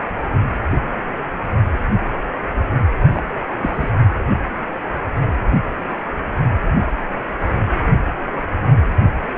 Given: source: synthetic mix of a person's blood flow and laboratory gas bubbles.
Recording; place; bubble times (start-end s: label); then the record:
Doppler ultrasound of blood flow; precordium
3.14-3.23 s: bubbles
3.60-3.90 s: bubbles
From the record:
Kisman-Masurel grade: 112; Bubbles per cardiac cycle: 1 to 2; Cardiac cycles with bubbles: 1 to 10%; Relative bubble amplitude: moderate (0.250 to 0.450); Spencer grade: 1 (occasional bubble signal discernible with the cardiac motion signal, with majority of cardiac periods free of bubbles); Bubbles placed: only in the low amplitude regions of the cardiac cycle